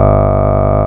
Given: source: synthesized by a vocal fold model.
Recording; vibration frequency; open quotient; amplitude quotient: sustained vowel; 50 Hz; 0.4; 1